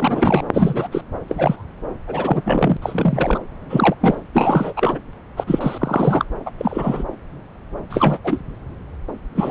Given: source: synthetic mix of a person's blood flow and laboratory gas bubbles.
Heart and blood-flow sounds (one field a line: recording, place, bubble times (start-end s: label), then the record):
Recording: Doppler ultrasound of blood flow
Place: subclavian vein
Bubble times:
0.00-0.49 s: bubbles
0.53-0.88 s: bubbles
0.91-1.02 s: bubbles
1.28-1.64 s: bubbles
2.06-2.77 s: bubbles
2.82-3.39 s: bubbles
3.69-3.95 s: bubbles
4.00-4.17 s: bubbles
4.33-4.73 s: bubbles
4.76-4.98 s: bubbles
5.37-5.44 s: bubbles
5.46-6.25 s: bubbles
6.46-6.51 s: bubbles
6.58-7.04 s: bubbles
7.89-8.18 s: bubbles
8.23-8.41 s: bubbles
9.36-9.51 s: bubbles
From the record:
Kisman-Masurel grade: 233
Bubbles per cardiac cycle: several, 3 to 8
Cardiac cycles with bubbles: 50 to 99%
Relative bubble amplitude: loud (0.450 to 0.775)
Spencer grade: 3 (all of the cardiac periods contain showers or single bubble signals, but not dominating or overriding the cardiac motion signals)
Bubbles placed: anywhere in the cardiac cycle